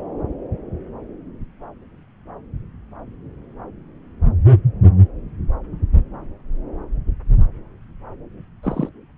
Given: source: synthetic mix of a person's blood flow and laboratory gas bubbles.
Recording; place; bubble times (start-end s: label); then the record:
Doppler ultrasound of blood flow; subclavian vein
8.63-8.89 s: bubbles
From the record:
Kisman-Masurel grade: 112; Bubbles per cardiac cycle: 1 to 2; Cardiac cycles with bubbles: 1 to 10%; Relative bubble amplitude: moderate (0.250 to 0.450); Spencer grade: 1 (occasional bubble signal discernible with the cardiac motion signal, with majority of cardiac periods free of bubbles); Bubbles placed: anywhere in the cardiac cycle